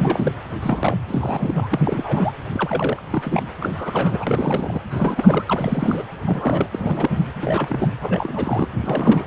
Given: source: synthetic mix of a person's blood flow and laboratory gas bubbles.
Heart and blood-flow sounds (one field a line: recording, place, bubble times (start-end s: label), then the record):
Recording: Doppler ultrasound of blood flow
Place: precordium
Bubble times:
0.00-0.32 s: bubbles
0.51-0.59 s: bubbles
0.62-0.96 s: bubbles
1.07-1.81 s: bubbles
1.85-2.32 s: bubbles
2.52-3.02 s: bubbles
3.10-3.42 s: bubbles
3.60-4.81 s: bubbles
4.91-5.45 s: bubbles
5.48-6.04 s: bubbles
6.21-6.71 s: bubbles
6.74-7.11 s: bubbles
7.42-7.88 s: bubbles
8.01-8.68 s: bubbles
8.72-8.75 s: bubbles
8.82-9.25 s: bubbles
From the record:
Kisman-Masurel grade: 342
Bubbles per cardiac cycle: rolling drumbeat, 9 or more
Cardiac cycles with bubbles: 100%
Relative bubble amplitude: moderate (0.250 to 0.450)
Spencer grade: 3 (all of the cardiac periods contain showers or single bubble signals, but not dominating or overriding the cardiac motion signals)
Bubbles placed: anywhere in the cardiac cycle